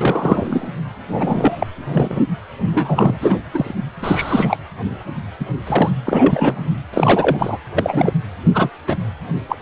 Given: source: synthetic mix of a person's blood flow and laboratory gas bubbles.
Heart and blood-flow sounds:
Doppler ultrasound of blood flow; precordium
0.00-0.69 s: bubbles
1.09-1.72 s: bubbles
1.89-2.21 s: bubbles
2.73-3.19 s: bubbles
3.21-3.41 s: bubbles
3.54-3.73 s: bubbles
4.00-4.58 s: bubbles
5.40-5.46 s: bubbles
5.67-5.91 s: bubbles
6.05-6.71 s: bubbles
6.92-7.58 s: bubbles
7.76-8.12 s: bubbles
8.54-8.70 s: bubbles
8.87-8.96 s: bubbles
9.48-9.56 s: bubbles
From the record:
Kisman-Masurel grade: 243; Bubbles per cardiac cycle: several, 3 to 8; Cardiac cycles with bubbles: 100%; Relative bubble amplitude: loud (0.450 to 0.775); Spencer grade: 3 (all of the cardiac periods contain showers or single bubble signals, but not dominating or overriding the cardiac motion signals); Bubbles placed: anywhere in the cardiac cycle

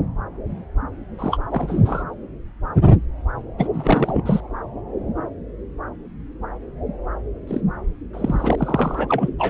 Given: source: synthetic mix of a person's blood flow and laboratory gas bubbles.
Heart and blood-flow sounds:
Doppler ultrasound of blood flow; subclavian vein
1.19-1.39 s: bubbles
1.51-2.03 s: bubbles
3.58-3.67 s: bubbles
3.73-4.21 s: bubbles
4.25-4.40 s: bubbles
7.47-7.61 s: bubbles
8.13-9.29 s: bubbles
9.38-9.50 s: bubbles
From the record:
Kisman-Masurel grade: 222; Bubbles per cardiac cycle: several, 3 to 8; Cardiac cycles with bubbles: 10 to 50%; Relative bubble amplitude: moderate (0.250 to 0.450); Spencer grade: 2 (many but less than half of the cardiac periods contain bubble signals, singularly or in groups); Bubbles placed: anywhere in the cardiac cycle

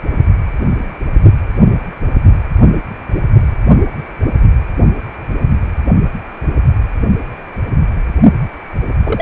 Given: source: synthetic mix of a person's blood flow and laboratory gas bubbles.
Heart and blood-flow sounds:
Doppler ultrasound of blood flow; precordium
9.04-9.22 s: bubbles
From the record:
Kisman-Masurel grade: 123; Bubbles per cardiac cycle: 1 to 2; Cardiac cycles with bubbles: 10 to 50%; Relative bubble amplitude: loud (0.450 to 0.775); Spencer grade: 2 (many but less than half of the cardiac periods contain bubble signals, singularly or in groups); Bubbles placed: only in the low amplitude regions of the cardiac cycle

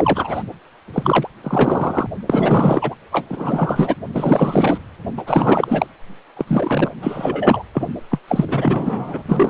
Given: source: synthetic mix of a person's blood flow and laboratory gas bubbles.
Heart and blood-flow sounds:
Doppler ultrasound of blood flow; precordium
0.00-0.43 s: bubbles
0.93-1.27 s: bubbles
1.43-2.07 s: bubbles
2.27-2.95 s: bubbles
3.12-3.26 s: bubbles
3.29-3.95 s: bubbles
4.12-4.78 s: bubbles
5.17-5.23 s: bubbles
5.26-5.87 s: bubbles
6.36-6.45 s: bubbles
6.48-6.92 s: bubbles
7.02-7.62 s: bubbles
7.74-7.88 s: bubbles
8.11-8.19 s: bubbles
8.28-9.23 s: bubbles
9.26-9.50 s: bubbles
From the record:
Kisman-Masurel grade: 444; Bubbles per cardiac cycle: continuous sound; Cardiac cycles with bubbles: 100%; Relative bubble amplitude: maximal (0.775 to 0.999); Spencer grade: 4 (maximum detectable bubble signal sounding continuously throughout systole and diastole of every cardiac period, and overriding the amplitude of the normal cardiac signals); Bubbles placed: anywhere in the cardiac cycle

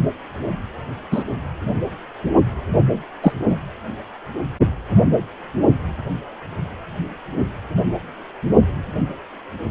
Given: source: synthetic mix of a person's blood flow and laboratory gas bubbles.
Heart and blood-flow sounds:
Doppler ultrasound of blood flow; precordium
1.11-1.24 s: bubbles
3.22-3.32 s: bubbles
3.50-3.57 s: bubbles
From the record:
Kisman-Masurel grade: 123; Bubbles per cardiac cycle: 1 to 2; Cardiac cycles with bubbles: 10 to 50%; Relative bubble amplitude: loud (0.450 to 0.775); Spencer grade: 2 (many but less than half of the cardiac periods contain bubble signals, singularly or in groups); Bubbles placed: only in the low amplitude regions of the cardiac cycle

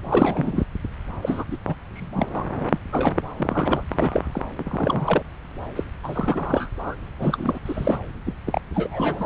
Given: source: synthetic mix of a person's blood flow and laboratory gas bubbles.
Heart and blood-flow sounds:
Doppler ultrasound of blood flow; subclavian vein
0.04-0.66 s: bubbles
1.22-1.44 s: bubbles
1.51-1.57 s: bubbles
1.66-1.75 s: bubbles
1.95-2.28 s: bubbles
2.33-2.44 s: bubbles
2.59-2.79 s: bubbles
2.92-3.22 s: bubbles
3.36-3.84 s: bubbles
3.88-4.41 s: bubbles
4.58-5.23 s: bubbles
5.75-5.83 s: bubbles
6.04-6.70 s: bubbles
6.78-6.95 s: bubbles
7.14-7.59 s: bubbles
7.65-7.98 s: bubbles
8.26-8.33 s: bubbles
8.46-8.61 s: bubbles
8.74-9.26 s: bubbles
From the record:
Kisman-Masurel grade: 332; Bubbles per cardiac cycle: rolling drumbeat, 9 or more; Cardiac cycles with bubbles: 50 to 99%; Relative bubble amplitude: moderate (0.250 to 0.450); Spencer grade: 3 (all of the cardiac periods contain showers or single bubble signals, but not dominating or overriding the cardiac motion signals); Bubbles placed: anywhere in the cardiac cycle

